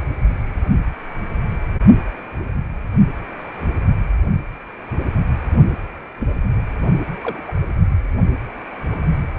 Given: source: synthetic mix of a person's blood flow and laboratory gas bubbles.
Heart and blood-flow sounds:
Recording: Doppler ultrasound of blood flow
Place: precordium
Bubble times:
6.19-6.34 s: bubbles
7.23-7.43 s: bubbles
7.47-7.53 s: bubbles
From the record:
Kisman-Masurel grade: 121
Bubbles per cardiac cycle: 1 to 2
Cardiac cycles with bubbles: 10 to 50%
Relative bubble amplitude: barely perceptible (0.100 to 0.250)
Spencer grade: 2 (many but less than half of the cardiac periods contain bubble signals, singularly or in groups)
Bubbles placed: anywhere in the cardiac cycle

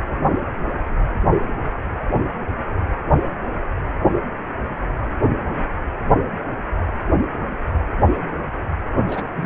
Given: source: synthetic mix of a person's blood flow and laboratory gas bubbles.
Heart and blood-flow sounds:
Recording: Doppler ultrasound of blood flow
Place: precordium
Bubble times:
9.07-9.23 s: bubbles
9.35-9.46 s: bubbles
From the record:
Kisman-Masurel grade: 211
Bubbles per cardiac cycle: several, 3 to 8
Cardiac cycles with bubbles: 1 to 10%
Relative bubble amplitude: barely perceptible (0.100 to 0.250)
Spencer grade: 1 (occasional bubble signal discernible with the cardiac motion signal, with majority of cardiac periods free of bubbles)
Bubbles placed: anywhere in the cardiac cycle

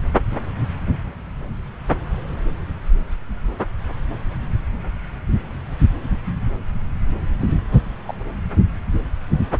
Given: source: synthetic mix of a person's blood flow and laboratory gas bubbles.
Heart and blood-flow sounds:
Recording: Doppler ultrasound of blood flow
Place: subclavian vein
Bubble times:
7.40-7.48 s: bubbles
7.73-7.83 s: bubbles
8.05-8.14 s: bubbles
From the record:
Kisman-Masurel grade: 211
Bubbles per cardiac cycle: several, 3 to 8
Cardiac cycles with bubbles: 1 to 10%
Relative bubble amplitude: barely perceptible (0.100 to 0.250)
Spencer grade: 1 (occasional bubble signal discernible with the cardiac motion signal, with majority of cardiac periods free of bubbles)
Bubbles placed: anywhere in the cardiac cycle

